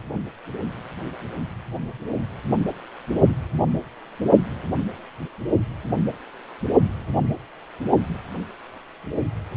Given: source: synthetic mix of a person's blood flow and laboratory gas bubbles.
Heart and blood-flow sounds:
Doppler ultrasound of blood flow; precordium
no bubbles
From the record:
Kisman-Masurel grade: 000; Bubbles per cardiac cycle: 0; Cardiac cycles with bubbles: 0%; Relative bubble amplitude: no bubbles discernible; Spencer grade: 0 (complete lack of bubble signals)

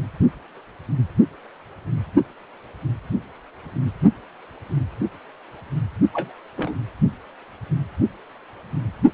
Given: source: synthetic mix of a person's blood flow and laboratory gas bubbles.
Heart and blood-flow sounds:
Doppler ultrasound of blood flow; precordium
6.13-6.33 s: bubbles
6.57-6.75 s: bubbles
From the record:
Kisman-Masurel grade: 122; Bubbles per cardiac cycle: 1 to 2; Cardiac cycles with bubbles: 10 to 50%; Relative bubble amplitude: moderate (0.250 to 0.450); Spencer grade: 2 (many but less than half of the cardiac periods contain bubble signals, singularly or in groups); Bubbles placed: only in the low amplitude regions of the cardiac cycle

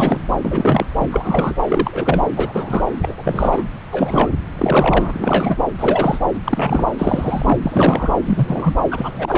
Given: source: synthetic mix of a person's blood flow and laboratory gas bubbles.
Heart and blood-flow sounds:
Doppler ultrasound of blood flow; subclavian vein
0.00-0.21 s: bubbles
0.41-0.87 s: bubbles
1.00-1.08 s: bubbles
1.12-1.55 s: bubbles
1.68-2.24 s: bubbles
2.35-2.83 s: bubbles
3.02-3.62 s: bubbles
3.92-4.32 s: bubbles
4.58-5.13 s: bubbles
5.16-5.57 s: bubbles
5.79-6.19 s: bubbles
6.44-6.88 s: bubbles
6.98-7.60 s: bubbles
7.62-8.13 s: bubbles
8.25-8.75 s: bubbles
8.90-9.38 s: bubbles
From the record:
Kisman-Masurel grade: 343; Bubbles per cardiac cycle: rolling drumbeat, 9 or more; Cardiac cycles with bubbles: 100%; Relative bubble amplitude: loud (0.450 to 0.775); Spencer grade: 3 (all of the cardiac periods contain showers or single bubble signals, but not dominating or overriding the cardiac motion signals); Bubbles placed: anywhere in the cardiac cycle

